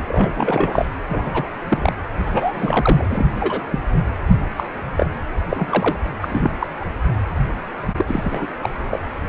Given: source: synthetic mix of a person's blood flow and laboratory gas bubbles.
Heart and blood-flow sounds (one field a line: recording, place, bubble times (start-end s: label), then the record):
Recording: Doppler ultrasound of blood flow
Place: precordium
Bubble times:
0.08-0.85 s: bubbles
1.09-1.49 s: bubbles
1.69-1.93 s: bubbles
2.25-3.05 s: bubbles
3.09-3.31 s: bubbles
3.40-3.61 s: bubbles
3.71-3.80 s: bubbles
4.56-4.67 s: bubbles
4.97-5.06 s: bubbles
5.49-5.98 s: bubbles
6.21-6.50 s: bubbles
6.59-6.67 s: bubbles
6.79-6.85 s: bubbles
7.88-7.94 s: bubbles
7.96-8.47 s: bubbles
8.63-8.71 s: bubbles
8.91-8.99 s: bubbles
From the record:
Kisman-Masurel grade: 243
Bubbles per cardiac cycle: several, 3 to 8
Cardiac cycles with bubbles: 100%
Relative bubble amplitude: loud (0.450 to 0.775)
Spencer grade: 3 (all of the cardiac periods contain showers or single bubble signals, but not dominating or overriding the cardiac motion signals)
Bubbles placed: anywhere in the cardiac cycle